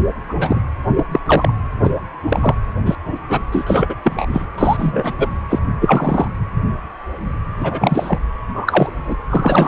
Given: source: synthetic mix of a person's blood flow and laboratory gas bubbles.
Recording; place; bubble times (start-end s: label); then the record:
Doppler ultrasound of blood flow; precordium
0.29-0.35 s: bubbles
0.40-0.61 s: bubbles
0.96-1.04 s: bubbles
1.11-1.20 s: bubbles
1.26-1.53 s: bubbles
1.83-1.91 s: bubbles
2.29-2.54 s: bubbles
2.85-2.95 s: bubbles
3.29-3.40 s: bubbles
3.52-3.95 s: bubbles
4.04-4.26 s: bubbles
4.33-4.46 s: bubbles
4.58-5.13 s: bubbles
5.17-5.29 s: bubbles
5.49-5.59 s: bubbles
5.80-6.28 s: bubbles
7.57-8.19 s: bubbles
8.45-8.89 s: bubbles
9.06-9.17 s: bubbles
9.29-9.68 s: bubbles
From the record:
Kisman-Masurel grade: 233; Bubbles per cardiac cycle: several, 3 to 8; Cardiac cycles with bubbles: 50 to 99%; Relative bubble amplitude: loud (0.450 to 0.775); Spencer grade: 3 (all of the cardiac periods contain showers or single bubble signals, but not dominating or overriding the cardiac motion signals); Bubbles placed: anywhere in the cardiac cycle